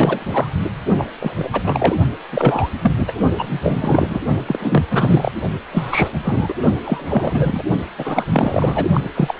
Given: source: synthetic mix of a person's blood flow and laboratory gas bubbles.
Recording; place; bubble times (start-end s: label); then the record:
Doppler ultrasound of blood flow; precordium
0.00-0.53 s: bubbles
0.98-1.11 s: bubbles
1.20-1.49 s: bubbles
1.53-1.95 s: bubbles
2.31-2.69 s: bubbles
2.81-2.93 s: bubbles
3.00-3.13 s: bubbles
3.37-4.20 s: bubbles
4.47-4.83 s: bubbles
4.90-5.32 s: bubbles
5.71-6.09 s: bubbles
6.12-6.54 s: bubbles
6.83-7.64 s: bubbles
7.98-8.26 s: bubbles
8.30-8.86 s: bubbles
8.94-9.02 s: bubbles
9.14-9.35 s: bubbles
9.38-9.40 s: bubbles
From the record:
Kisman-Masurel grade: 343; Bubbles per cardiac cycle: rolling drumbeat, 9 or more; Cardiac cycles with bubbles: 100%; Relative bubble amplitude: loud (0.450 to 0.775); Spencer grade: 3 (all of the cardiac periods contain showers or single bubble signals, but not dominating or overriding the cardiac motion signals); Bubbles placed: only in the low amplitude regions of the cardiac cycle